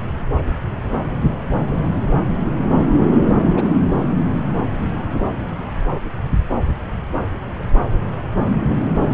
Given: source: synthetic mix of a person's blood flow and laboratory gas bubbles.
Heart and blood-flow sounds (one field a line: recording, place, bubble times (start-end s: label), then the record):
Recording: Doppler ultrasound of blood flow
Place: subclavian vein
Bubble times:
3.25-3.30 s: bubbles
3.37-3.50 s: bubbles
3.55-3.75 s: bubbles
3.99-4.07 s: bubbles
From the record:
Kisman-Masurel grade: 212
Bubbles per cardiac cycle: several, 3 to 8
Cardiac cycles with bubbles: 1 to 10%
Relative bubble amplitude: moderate (0.250 to 0.450)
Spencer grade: 1 (occasional bubble signal discernible with the cardiac motion signal, with majority of cardiac periods free of bubbles)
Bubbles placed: anywhere in the cardiac cycle